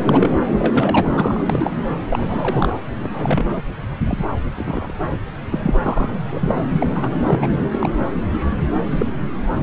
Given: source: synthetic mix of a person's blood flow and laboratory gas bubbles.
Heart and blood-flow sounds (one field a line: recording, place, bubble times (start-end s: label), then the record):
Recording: Doppler ultrasound of blood flow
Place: subclavian vein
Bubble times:
0.03-0.34 s: bubbles
0.58-1.45 s: bubbles
1.49-1.76 s: bubbles
2.09-2.75 s: bubbles
3.02-3.63 s: bubbles
4.06-4.25 s: bubbles
4.56-4.92 s: bubbles
5.11-5.17 s: bubbles
5.50-5.80 s: bubbles
5.83-6.18 s: bubbles
6.31-6.66 s: bubbles
6.80-6.90 s: bubbles
6.94-7.47 s: bubbles
7.72-7.90 s: bubbles
8.85-9.20 s: bubbles
9.53-9.63 s: bubbles
From the record:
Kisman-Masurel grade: 242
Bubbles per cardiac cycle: several, 3 to 8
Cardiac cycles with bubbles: 100%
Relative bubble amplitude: moderate (0.250 to 0.450)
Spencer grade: 3 (all of the cardiac periods contain showers or single bubble signals, but not dominating or overriding the cardiac motion signals)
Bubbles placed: anywhere in the cardiac cycle